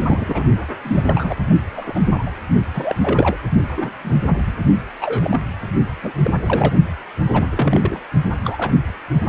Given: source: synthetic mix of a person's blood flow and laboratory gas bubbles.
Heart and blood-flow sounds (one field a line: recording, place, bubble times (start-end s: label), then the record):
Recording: Doppler ultrasound of blood flow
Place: precordium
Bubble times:
0.00-0.43 s: bubbles
0.82-1.02 s: bubbles
1.06-1.34 s: bubbles
1.77-2.00 s: bubbles
2.14-2.31 s: bubbles
2.74-3.37 s: bubbles
3.77-3.91 s: bubbles
4.03-4.16 s: bubbles
4.47-4.52 s: bubbles
5.01-5.45 s: bubbles
6.02-6.12 s: bubbles
6.23-6.30 s: bubbles
6.40-6.73 s: bubbles
7.30-7.48 s: bubbles
7.51-7.99 s: bubbles
8.44-8.71 s: bubbles
From the record:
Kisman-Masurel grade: 242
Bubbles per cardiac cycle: several, 3 to 8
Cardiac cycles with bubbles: 100%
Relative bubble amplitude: moderate (0.250 to 0.450)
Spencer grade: 3 (all of the cardiac periods contain showers or single bubble signals, but not dominating or overriding the cardiac motion signals)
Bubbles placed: only in the low amplitude regions of the cardiac cycle